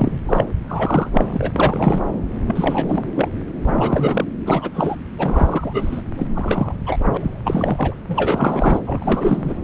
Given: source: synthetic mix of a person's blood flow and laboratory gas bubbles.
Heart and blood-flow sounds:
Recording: Doppler ultrasound of blood flow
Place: subclavian vein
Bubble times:
0.00-0.18 s: bubbles
0.27-0.44 s: bubbles
0.68-1.10 s: bubbles
1.13-2.02 s: bubbles
2.47-3.08 s: bubbles
3.15-3.28 s: bubbles
3.65-4.24 s: bubbles
4.45-4.70 s: bubbles
4.74-4.96 s: bubbles
5.18-6.01 s: bubbles
6.17-6.27 s: bubbles
6.34-6.74 s: bubbles
6.86-6.98 s: bubbles
7.13-7.97 s: bubbles
8.07-8.80 s: bubbles
8.86-9.54 s: bubbles
From the record:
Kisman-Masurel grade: 333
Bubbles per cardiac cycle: rolling drumbeat, 9 or more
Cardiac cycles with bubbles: 50 to 99%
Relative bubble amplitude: loud (0.450 to 0.775)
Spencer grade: 3 (all of the cardiac periods contain showers or single bubble signals, but not dominating or overriding the cardiac motion signals)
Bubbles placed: anywhere in the cardiac cycle

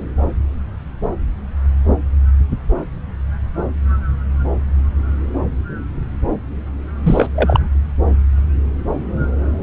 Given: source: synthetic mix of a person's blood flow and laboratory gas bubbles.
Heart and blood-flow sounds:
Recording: Doppler ultrasound of blood flow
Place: subclavian vein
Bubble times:
7.04-7.31 s: bubbles
7.35-7.60 s: bubbles
From the record:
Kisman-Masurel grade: 213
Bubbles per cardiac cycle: several, 3 to 8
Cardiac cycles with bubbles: 1 to 10%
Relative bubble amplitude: loud (0.450 to 0.775)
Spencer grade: 1 (occasional bubble signal discernible with the cardiac motion signal, with majority of cardiac periods free of bubbles)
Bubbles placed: anywhere in the cardiac cycle

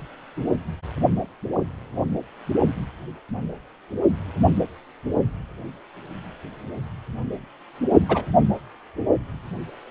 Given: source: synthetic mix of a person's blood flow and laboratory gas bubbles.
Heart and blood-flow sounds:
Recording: Doppler ultrasound of blood flow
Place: precordium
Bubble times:
8.08-8.26 s: bubbles
From the record:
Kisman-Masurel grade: 123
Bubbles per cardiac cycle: 1 to 2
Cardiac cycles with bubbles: 10 to 50%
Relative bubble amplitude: loud (0.450 to 0.775)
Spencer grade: 2 (many but less than half of the cardiac periods contain bubble signals, singularly or in groups)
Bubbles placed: only in the low amplitude regions of the cardiac cycle

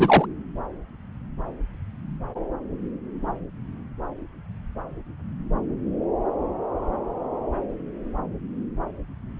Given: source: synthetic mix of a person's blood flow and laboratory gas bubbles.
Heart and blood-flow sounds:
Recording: Doppler ultrasound of blood flow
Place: subclavian vein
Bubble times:
0.00-0.26 s: bubbles
From the record:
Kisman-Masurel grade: 223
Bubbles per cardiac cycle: several, 3 to 8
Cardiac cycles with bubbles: 10 to 50%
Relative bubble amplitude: loud (0.450 to 0.775)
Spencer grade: 2 (many but less than half of the cardiac periods contain bubble signals, singularly or in groups)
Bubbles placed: anywhere in the cardiac cycle

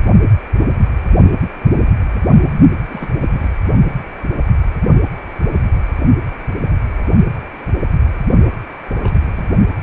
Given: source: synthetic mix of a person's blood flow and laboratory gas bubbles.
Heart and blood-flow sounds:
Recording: Doppler ultrasound of blood flow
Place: precordium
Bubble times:
2.90-3.13 s: bubbles
3.19-3.50 s: bubbles
8.88-8.96 s: bubbles
9.02-9.26 s: bubbles
9.31-9.46 s: bubbles
From the record:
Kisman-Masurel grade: 221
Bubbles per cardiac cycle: several, 3 to 8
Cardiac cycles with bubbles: 10 to 50%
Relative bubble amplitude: barely perceptible (0.100 to 0.250)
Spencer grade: 2 (many but less than half of the cardiac periods contain bubble signals, singularly or in groups)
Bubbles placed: only in the low amplitude regions of the cardiac cycle

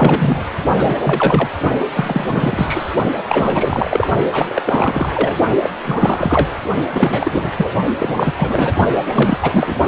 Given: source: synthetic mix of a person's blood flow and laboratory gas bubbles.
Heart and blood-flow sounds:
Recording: Doppler ultrasound of blood flow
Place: precordium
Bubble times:
0.00-0.45 s: bubbles
0.75-1.49 s: bubbles
1.93-2.95 s: bubbles
3.28-4.07 s: bubbles
4.31-4.62 s: bubbles
4.65-5.38 s: bubbles
5.63-5.71 s: bubbles
5.84-6.50 s: bubbles
6.91-7.52 s: bubbles
7.56-7.71 s: bubbles
7.98-8.32 s: bubbles
8.39-8.73 s: bubbles
9.04-9.78 s: bubbles
From the record:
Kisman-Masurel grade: 343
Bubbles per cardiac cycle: rolling drumbeat, 9 or more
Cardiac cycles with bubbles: 100%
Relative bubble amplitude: loud (0.450 to 0.775)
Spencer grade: 3 (all of the cardiac periods contain showers or single bubble signals, but not dominating or overriding the cardiac motion signals)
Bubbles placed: only in the low amplitude regions of the cardiac cycle

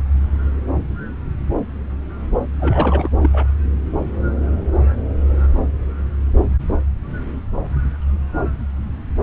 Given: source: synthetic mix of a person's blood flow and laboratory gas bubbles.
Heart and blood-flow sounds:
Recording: Doppler ultrasound of blood flow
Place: subclavian vein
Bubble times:
2.59-3.08 s: bubbles
3.21-3.47 s: bubbles
From the record:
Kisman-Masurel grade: 212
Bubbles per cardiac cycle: several, 3 to 8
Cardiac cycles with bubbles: 1 to 10%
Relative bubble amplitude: moderate (0.250 to 0.450)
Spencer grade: 1 (occasional bubble signal discernible with the cardiac motion signal, with majority of cardiac periods free of bubbles)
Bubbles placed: anywhere in the cardiac cycle

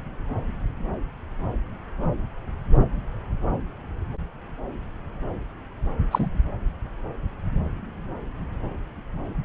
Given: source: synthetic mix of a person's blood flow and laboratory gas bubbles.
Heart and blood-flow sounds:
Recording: Doppler ultrasound of blood flow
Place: subclavian vein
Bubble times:
6.11-6.29 s: bubbles
From the record:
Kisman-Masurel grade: 122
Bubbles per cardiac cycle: 1 to 2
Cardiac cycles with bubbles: 10 to 50%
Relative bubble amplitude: moderate (0.250 to 0.450)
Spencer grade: 2 (many but less than half of the cardiac periods contain bubble signals, singularly or in groups)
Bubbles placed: anywhere in the cardiac cycle

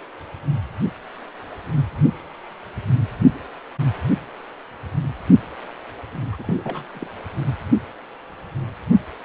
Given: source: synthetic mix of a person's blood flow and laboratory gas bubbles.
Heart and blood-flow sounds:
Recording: Doppler ultrasound of blood flow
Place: precordium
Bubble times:
6.32-6.92 s: bubbles
6.94-7.07 s: bubbles
From the record:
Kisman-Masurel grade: 211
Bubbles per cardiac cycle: several, 3 to 8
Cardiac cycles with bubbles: 1 to 10%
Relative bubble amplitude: barely perceptible (0.100 to 0.250)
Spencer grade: 1 (occasional bubble signal discernible with the cardiac motion signal, with majority of cardiac periods free of bubbles)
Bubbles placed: anywhere in the cardiac cycle

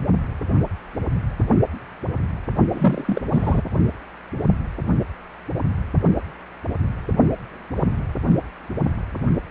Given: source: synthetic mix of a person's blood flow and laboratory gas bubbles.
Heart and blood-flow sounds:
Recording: Doppler ultrasound of blood flow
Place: precordium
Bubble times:
2.71-3.21 s: bubbles
3.31-3.61 s: bubbles
From the record:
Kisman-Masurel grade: 212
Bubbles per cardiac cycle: several, 3 to 8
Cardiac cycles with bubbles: 1 to 10%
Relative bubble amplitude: moderate (0.250 to 0.450)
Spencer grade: 1 (occasional bubble signal discernible with the cardiac motion signal, with majority of cardiac periods free of bubbles)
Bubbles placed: only in the low amplitude regions of the cardiac cycle

